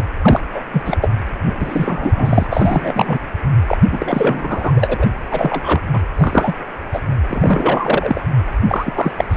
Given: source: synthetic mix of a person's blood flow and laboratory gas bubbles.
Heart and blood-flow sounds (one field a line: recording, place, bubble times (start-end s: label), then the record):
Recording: Doppler ultrasound of blood flow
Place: precordium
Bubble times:
0.00-0.07 s: bubbles
0.21-0.41 s: bubbles
0.52-0.65 s: bubbles
0.72-0.82 s: bubbles
0.85-0.97 s: bubbles
1.02-1.10 s: bubbles
1.45-1.54 s: bubbles
1.60-2.46 s: bubbles
2.50-2.93 s: bubbles
2.96-3.27 s: bubbles
3.67-3.77 s: bubbles
3.91-4.71 s: bubbles
4.76-5.06 s: bubbles
5.30-5.81 s: bubbles
5.92-6.00 s: bubbles
6.17-6.56 s: bubbles
6.92-7.00 s: bubbles
7.27-8.21 s: bubbles
8.69-9.12 s: bubbles
9.18-9.25 s: bubbles
9.31-9.37 s: bubbles
From the record:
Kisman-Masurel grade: 343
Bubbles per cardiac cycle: rolling drumbeat, 9 or more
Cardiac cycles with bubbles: 100%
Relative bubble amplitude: loud (0.450 to 0.775)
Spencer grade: 3 (all of the cardiac periods contain showers or single bubble signals, but not dominating or overriding the cardiac motion signals)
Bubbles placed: anywhere in the cardiac cycle